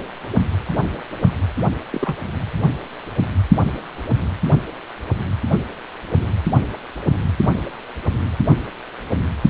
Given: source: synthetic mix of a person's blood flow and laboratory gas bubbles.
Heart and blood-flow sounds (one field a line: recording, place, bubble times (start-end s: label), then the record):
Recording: Doppler ultrasound of blood flow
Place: precordium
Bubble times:
1.91-2.16 s: bubbles
From the record:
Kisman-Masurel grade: 212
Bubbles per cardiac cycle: several, 3 to 8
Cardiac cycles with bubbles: 1 to 10%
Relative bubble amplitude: moderate (0.250 to 0.450)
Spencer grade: 1 (occasional bubble signal discernible with the cardiac motion signal, with majority of cardiac periods free of bubbles)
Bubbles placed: anywhere in the cardiac cycle